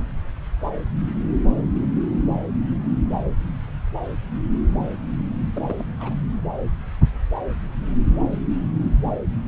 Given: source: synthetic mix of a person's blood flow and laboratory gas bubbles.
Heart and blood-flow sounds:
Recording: Doppler ultrasound of blood flow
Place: subclavian vein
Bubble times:
5.55-5.85 s: bubbles
5.99-6.15 s: bubbles
From the record:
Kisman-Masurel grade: 211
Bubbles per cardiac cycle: several, 3 to 8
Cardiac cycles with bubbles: 1 to 10%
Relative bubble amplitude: barely perceptible (0.100 to 0.250)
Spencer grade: 1 (occasional bubble signal discernible with the cardiac motion signal, with majority of cardiac periods free of bubbles)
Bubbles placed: anywhere in the cardiac cycle

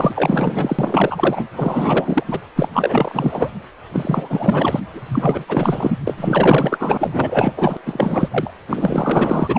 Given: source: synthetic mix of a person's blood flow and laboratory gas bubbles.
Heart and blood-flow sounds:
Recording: Doppler ultrasound of blood flow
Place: precordium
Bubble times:
0.00-1.48 s: bubbles
1.56-2.23 s: bubbles
2.28-2.40 s: bubbles
2.55-2.68 s: bubbles
2.73-3.50 s: bubbles
3.92-4.80 s: bubbles
4.94-5.46 s: bubbles
5.48-5.99 s: bubbles
6.07-7.53 s: bubbles
7.57-7.77 s: bubbles
7.86-8.51 s: bubbles
8.68-9.59 s: bubbles
From the record:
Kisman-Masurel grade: 444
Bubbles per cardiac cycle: continuous sound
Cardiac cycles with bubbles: 100%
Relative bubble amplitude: maximal (0.775 to 0.999)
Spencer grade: 4 (maximum detectable bubble signal sounding continuously throughout systole and diastole of every cardiac period, and overriding the amplitude of the normal cardiac signals)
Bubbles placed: anywhere in the cardiac cycle

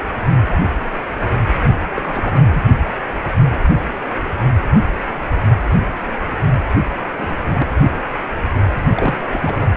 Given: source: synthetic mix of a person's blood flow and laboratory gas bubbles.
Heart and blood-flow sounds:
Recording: Doppler ultrasound of blood flow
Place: precordium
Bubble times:
1.96-2.62 s: bubbles
7.18-7.37 s: bubbles
7.46-7.67 s: bubbles
8.96-9.17 s: bubbles
9.23-9.29 s: bubbles
9.31-9.67 s: bubbles
From the record:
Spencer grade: 2 (many but less than half of the cardiac periods contain bubble signals, singularly or in groups)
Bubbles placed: only in the low amplitude regions of the cardiac cycle

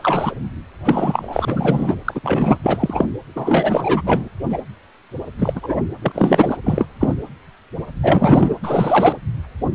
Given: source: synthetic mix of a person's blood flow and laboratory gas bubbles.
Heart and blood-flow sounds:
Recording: Doppler ultrasound of blood flow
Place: precordium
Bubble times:
0.00-0.35 s: bubbles
0.84-1.95 s: bubbles
2.04-2.20 s: bubbles
2.23-2.58 s: bubbles
2.63-3.06 s: bubbles
3.35-4.01 s: bubbles
4.04-4.28 s: bubbles
4.49-4.61 s: bubbles
5.39-5.80 s: bubbles
6.01-6.57 s: bubbles
6.64-6.85 s: bubbles
6.99-7.14 s: bubbles
8.03-8.55 s: bubbles
8.63-9.17 s: bubbles
From the record:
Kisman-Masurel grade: 233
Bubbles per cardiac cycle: several, 3 to 8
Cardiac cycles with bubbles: 50 to 99%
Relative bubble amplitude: loud (0.450 to 0.775)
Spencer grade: 3 (all of the cardiac periods contain showers or single bubble signals, but not dominating or overriding the cardiac motion signals)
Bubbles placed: anywhere in the cardiac cycle

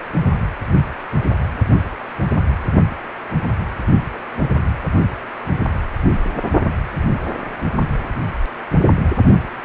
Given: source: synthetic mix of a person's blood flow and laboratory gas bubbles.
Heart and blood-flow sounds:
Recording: Doppler ultrasound of blood flow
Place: precordium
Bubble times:
4.12-4.17 s: bubbles
4.36-4.49 s: bubbles
From the record:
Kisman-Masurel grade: 211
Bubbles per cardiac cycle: several, 3 to 8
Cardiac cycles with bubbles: 1 to 10%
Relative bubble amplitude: barely perceptible (0.100 to 0.250)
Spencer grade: 1 (occasional bubble signal discernible with the cardiac motion signal, with majority of cardiac periods free of bubbles)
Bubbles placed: only in the low amplitude regions of the cardiac cycle

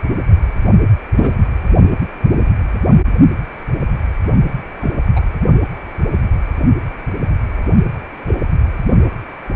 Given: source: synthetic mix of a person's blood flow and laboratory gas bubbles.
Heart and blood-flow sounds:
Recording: Doppler ultrasound of blood flow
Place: precordium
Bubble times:
1.16-1.34 s: bubbles
4.80-4.92 s: bubbles
5.16-5.21 s: bubbles
8.28-8.44 s: bubbles
From the record:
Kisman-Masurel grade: 123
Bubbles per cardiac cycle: 1 to 2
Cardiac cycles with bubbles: 10 to 50%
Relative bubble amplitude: loud (0.450 to 0.775)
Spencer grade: 2 (many but less than half of the cardiac periods contain bubble signals, singularly or in groups)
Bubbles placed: only in the low amplitude regions of the cardiac cycle

